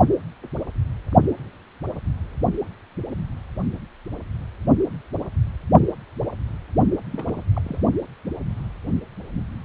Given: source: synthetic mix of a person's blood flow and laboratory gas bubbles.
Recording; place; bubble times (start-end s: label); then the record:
Doppler ultrasound of blood flow; precordium
7.11-7.42 s: bubbles
7.53-7.62 s: bubbles
7.64-7.81 s: bubbles
From the record:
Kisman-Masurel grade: 221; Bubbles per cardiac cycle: several, 3 to 8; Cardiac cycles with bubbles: 10 to 50%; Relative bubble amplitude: barely perceptible (0.100 to 0.250); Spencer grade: 2 (many but less than half of the cardiac periods contain bubble signals, singularly or in groups); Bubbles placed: only in the low amplitude regions of the cardiac cycle